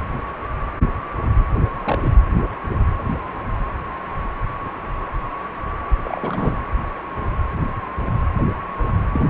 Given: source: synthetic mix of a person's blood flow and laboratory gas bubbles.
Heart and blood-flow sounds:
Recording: Doppler ultrasound of blood flow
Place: precordium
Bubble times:
1.84-2.14 s: bubbles
6.04-6.64 s: bubbles
9.10-9.27 s: bubbles
From the record:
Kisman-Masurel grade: 221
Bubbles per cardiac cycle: several, 3 to 8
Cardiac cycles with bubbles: 10 to 50%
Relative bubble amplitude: barely perceptible (0.100 to 0.250)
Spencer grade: 2 (many but less than half of the cardiac periods contain bubble signals, singularly or in groups)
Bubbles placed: anywhere in the cardiac cycle

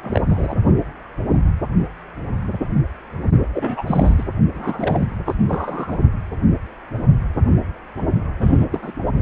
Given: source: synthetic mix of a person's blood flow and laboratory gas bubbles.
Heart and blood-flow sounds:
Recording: Doppler ultrasound of blood flow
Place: precordium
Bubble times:
0.02-0.21 s: bubbles
0.29-0.55 s: bubbles
3.53-3.83 s: bubbles
3.86-4.27 s: bubbles
4.54-5.08 s: bubbles
5.25-5.35 s: bubbles
5.48-5.98 s: bubbles
8.40-8.66 s: bubbles
8.71-8.92 s: bubbles
From the record:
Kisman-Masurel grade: 222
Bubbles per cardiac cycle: several, 3 to 8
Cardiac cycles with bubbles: 10 to 50%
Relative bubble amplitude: moderate (0.250 to 0.450)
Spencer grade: 2 (many but less than half of the cardiac periods contain bubble signals, singularly or in groups)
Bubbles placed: only in the low amplitude regions of the cardiac cycle

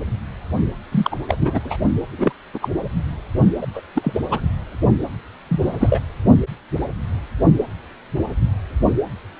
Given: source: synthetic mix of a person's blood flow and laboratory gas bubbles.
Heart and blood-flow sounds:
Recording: Doppler ultrasound of blood flow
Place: precordium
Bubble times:
0.92-1.17 s: bubbles
1.28-1.36 s: bubbles
1.39-1.60 s: bubbles
1.64-1.77 s: bubbles
2.18-2.33 s: bubbles
2.54-2.69 s: bubbles
3.61-3.67 s: bubbles
3.74-3.81 s: bubbles
3.95-4.21 s: bubbles
4.30-4.41 s: bubbles
5.49-5.60 s: bubbles
5.63-5.99 s: bubbles
From the record:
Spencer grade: 2 (many but less than half of the cardiac periods contain bubble signals, singularly or in groups)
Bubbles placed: only in the low amplitude regions of the cardiac cycle

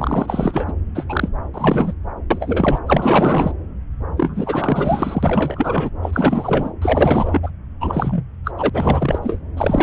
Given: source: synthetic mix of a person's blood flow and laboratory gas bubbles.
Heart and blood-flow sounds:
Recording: Doppler ultrasound of blood flow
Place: subclavian vein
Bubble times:
0.00-0.73 s: bubbles
0.94-1.06 s: bubbles
1.09-1.29 s: bubbles
1.53-1.94 s: bubbles
2.31-2.79 s: bubbles
2.86-3.52 s: bubbles
4.17-5.90 s: bubbles
6.02-6.73 s: bubbles
6.82-7.40 s: bubbles
7.42-7.50 s: bubbles
7.80-8.23 s: bubbles
8.44-8.52 s: bubbles
8.57-8.70 s: bubbles
8.73-9.19 s: bubbles
9.21-9.42 s: bubbles
9.56-9.83 s: bubbles
From the record:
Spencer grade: 4 (maximum detectable bubble signal sounding continuously throughout systole and diastole of every cardiac period, and overriding the amplitude of the normal cardiac signals)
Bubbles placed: anywhere in the cardiac cycle

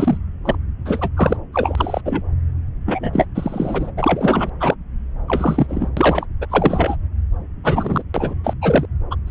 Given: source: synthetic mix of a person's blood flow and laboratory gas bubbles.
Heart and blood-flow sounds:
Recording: Doppler ultrasound of blood flow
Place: subclavian vein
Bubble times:
0.00-0.17 s: bubbles
0.45-0.55 s: bubbles
0.85-1.09 s: bubbles
1.17-1.36 s: bubbles
1.52-2.01 s: bubbles
2.05-2.21 s: bubbles
2.86-3.25 s: bubbles
3.34-3.91 s: bubbles
3.97-4.50 s: bubbles
4.60-4.75 s: bubbles
5.28-5.91 s: bubbles
5.96-6.26 s: bubbles
6.41-6.46 s: bubbles
6.50-6.96 s: bubbles
7.63-8.03 s: bubbles
8.14-8.35 s: bubbles
8.44-8.54 s: bubbles
8.62-8.86 s: bubbles
9.11-9.15 s: bubbles
9.27-9.31 s: bubbles
From the record:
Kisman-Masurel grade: 243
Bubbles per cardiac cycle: several, 3 to 8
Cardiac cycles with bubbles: 100%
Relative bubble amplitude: loud (0.450 to 0.775)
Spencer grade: 3 (all of the cardiac periods contain showers or single bubble signals, but not dominating or overriding the cardiac motion signals)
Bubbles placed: anywhere in the cardiac cycle

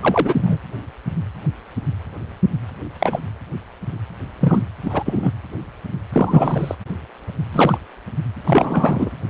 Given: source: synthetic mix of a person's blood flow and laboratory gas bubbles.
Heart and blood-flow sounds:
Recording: Doppler ultrasound of blood flow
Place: precordium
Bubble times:
0.01-0.59 s: bubbles
2.98-3.19 s: bubbles
4.40-4.63 s: bubbles
4.82-5.31 s: bubbles
6.12-6.75 s: bubbles
7.52-7.78 s: bubbles
8.44-9.11 s: bubbles
From the record:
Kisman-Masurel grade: 233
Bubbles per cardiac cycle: several, 3 to 8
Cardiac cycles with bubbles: 50 to 99%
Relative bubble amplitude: loud (0.450 to 0.775)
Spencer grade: 3 (all of the cardiac periods contain showers or single bubble signals, but not dominating or overriding the cardiac motion signals)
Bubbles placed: anywhere in the cardiac cycle

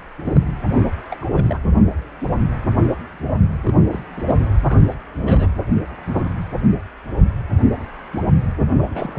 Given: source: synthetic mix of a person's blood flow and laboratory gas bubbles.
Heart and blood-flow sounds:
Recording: Doppler ultrasound of blood flow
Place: precordium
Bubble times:
0.23-0.41 s: bubbles
0.71-0.81 s: bubbles
1.10-1.24 s: bubbles
1.32-1.59 s: bubbles
3.63-4.00 s: bubbles
4.17-4.23 s: bubbles
4.27-4.36 s: bubbles
4.68-4.94 s: bubbles
5.19-5.51 s: bubbles
8.78-9.19 s: bubbles
From the record:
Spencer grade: 2 (many but less than half of the cardiac periods contain bubble signals, singularly or in groups)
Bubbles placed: anywhere in the cardiac cycle

